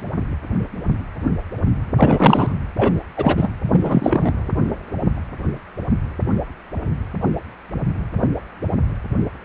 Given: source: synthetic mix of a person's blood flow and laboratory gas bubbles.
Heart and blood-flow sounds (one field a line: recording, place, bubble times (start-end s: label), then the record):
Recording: Doppler ultrasound of blood flow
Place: precordium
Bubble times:
1.96-2.53 s: bubbles
2.76-2.92 s: bubbles
3.17-3.49 s: bubbles
3.71-4.32 s: bubbles
From the record:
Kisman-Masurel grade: 223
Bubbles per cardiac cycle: several, 3 to 8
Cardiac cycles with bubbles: 10 to 50%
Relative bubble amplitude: loud (0.450 to 0.775)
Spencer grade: 2 (many but less than half of the cardiac periods contain bubble signals, singularly or in groups)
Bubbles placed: anywhere in the cardiac cycle